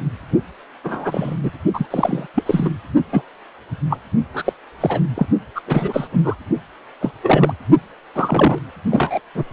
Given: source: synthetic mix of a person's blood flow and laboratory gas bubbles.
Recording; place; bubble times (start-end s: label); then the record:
Doppler ultrasound of blood flow; precordium
0.84-1.35 s: bubbles
1.42-1.50 s: bubbles
1.74-1.86 s: bubbles
1.90-2.27 s: bubbles
2.34-2.43 s: bubbles
2.46-2.69 s: bubbles
3.12-3.22 s: bubbles
3.90-3.98 s: bubbles
4.33-4.53 s: bubbles
4.80-5.00 s: bubbles
5.16-5.26 s: bubbles
5.55-5.60 s: bubbles
5.67-6.08 s: bubbles
6.12-6.21 s: bubbles
6.24-6.36 s: bubbles
7.01-7.11 s: bubbles
7.23-7.53 s: bubbles
8.15-8.58 s: bubbles
8.90-9.20 s: bubbles
9.34-9.44 s: bubbles
From the record:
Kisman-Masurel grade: 243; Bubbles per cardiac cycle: several, 3 to 8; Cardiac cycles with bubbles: 100%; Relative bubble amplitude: loud (0.450 to 0.775); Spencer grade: 3 (all of the cardiac periods contain showers or single bubble signals, but not dominating or overriding the cardiac motion signals); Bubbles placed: only in the low amplitude regions of the cardiac cycle